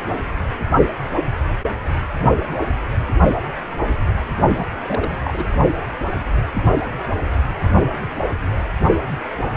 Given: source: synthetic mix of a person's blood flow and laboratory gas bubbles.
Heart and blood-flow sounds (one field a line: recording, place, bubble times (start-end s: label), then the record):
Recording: Doppler ultrasound of blood flow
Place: precordium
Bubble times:
4.56-4.67 s: bubbles
4.82-5.16 s: bubbles
5.24-5.48 s: bubbles
From the record:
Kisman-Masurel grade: 211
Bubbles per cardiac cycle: several, 3 to 8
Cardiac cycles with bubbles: 1 to 10%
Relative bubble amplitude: barely perceptible (0.100 to 0.250)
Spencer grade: 1 (occasional bubble signal discernible with the cardiac motion signal, with majority of cardiac periods free of bubbles)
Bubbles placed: only in the low amplitude regions of the cardiac cycle